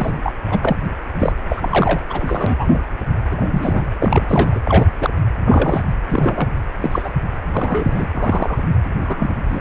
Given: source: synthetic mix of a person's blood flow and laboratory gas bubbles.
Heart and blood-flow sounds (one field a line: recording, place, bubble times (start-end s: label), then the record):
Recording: Doppler ultrasound of blood flow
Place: precordium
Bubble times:
0.00-0.13 s: bubbles
0.24-0.32 s: bubbles
0.50-0.59 s: bubbles
0.62-0.76 s: bubbles
1.19-1.32 s: bubbles
1.48-1.99 s: bubbles
2.10-2.80 s: bubbles
3.30-3.95 s: bubbles
4.00-4.59 s: bubbles
4.65-4.94 s: bubbles
5.00-5.10 s: bubbles
5.45-5.83 s: bubbles
6.09-6.49 s: bubbles
6.81-7.13 s: bubbles
7.52-8.06 s: bubbles
8.11-8.63 s: bubbles
9.04-9.30 s: bubbles
9.49-9.60 s: bubbles
From the record:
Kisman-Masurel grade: 233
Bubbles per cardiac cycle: several, 3 to 8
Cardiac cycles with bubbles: 50 to 99%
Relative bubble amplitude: loud (0.450 to 0.775)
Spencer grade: 3 (all of the cardiac periods contain showers or single bubble signals, but not dominating or overriding the cardiac motion signals)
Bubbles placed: anywhere in the cardiac cycle